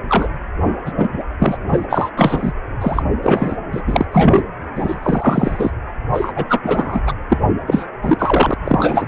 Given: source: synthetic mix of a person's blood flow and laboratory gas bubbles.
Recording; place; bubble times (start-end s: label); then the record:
Doppler ultrasound of blood flow; precordium
0.08-0.27 s: bubbles
0.85-0.93 s: bubbles
0.97-1.08 s: bubbles
1.11-1.24 s: bubbles
1.39-1.58 s: bubbles
1.67-1.87 s: bubbles
1.90-2.10 s: bubbles
2.17-2.52 s: bubbles
2.81-3.02 s: bubbles
3.23-3.56 s: bubbles
3.72-3.81 s: bubbles
3.86-4.05 s: bubbles
4.12-4.44 s: bubbles
4.75-5.71 s: bubbles
6.12-6.32 s: bubbles
6.36-6.44 s: bubbles
6.49-7.03 s: bubbles
7.06-7.12 s: bubbles
7.30-7.37 s: bubbles
7.67-7.85 s: bubbles
8.02-8.54 s: bubbles
8.64-9.07 s: bubbles
From the record:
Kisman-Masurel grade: 343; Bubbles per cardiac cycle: rolling drumbeat, 9 or more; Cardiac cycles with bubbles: 100%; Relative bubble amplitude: loud (0.450 to 0.775); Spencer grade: 3 (all of the cardiac periods contain showers or single bubble signals, but not dominating or overriding the cardiac motion signals); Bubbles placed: anywhere in the cardiac cycle